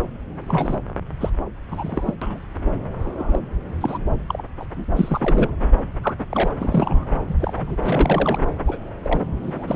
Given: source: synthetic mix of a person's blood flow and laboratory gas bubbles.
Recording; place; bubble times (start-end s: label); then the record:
Doppler ultrasound of blood flow; subclavian vein
0.48-0.78 s: bubbles
1.20-1.30 s: bubbles
1.69-2.16 s: bubbles
2.22-2.40 s: bubbles
3.01-3.39 s: bubbles
3.81-3.98 s: bubbles
4.28-4.42 s: bubbles
4.59-4.66 s: bubbles
4.76-4.84 s: bubbles
4.96-5.50 s: bubbles
6.03-6.15 s: bubbles
6.19-6.24 s: bubbles
6.31-6.52 s: bubbles
6.59-7.19 s: bubbles
7.27-7.36 s: bubbles
7.40-7.77 s: bubbles
7.83-8.38 s: bubbles
8.67-8.78 s: bubbles
9.02-9.26 s: bubbles
9.42-9.76 s: bubbles
From the record:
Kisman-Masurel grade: 242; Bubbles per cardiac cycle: several, 3 to 8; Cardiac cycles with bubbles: 100%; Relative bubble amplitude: moderate (0.250 to 0.450); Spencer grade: 3 (all of the cardiac periods contain showers or single bubble signals, but not dominating or overriding the cardiac motion signals); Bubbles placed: anywhere in the cardiac cycle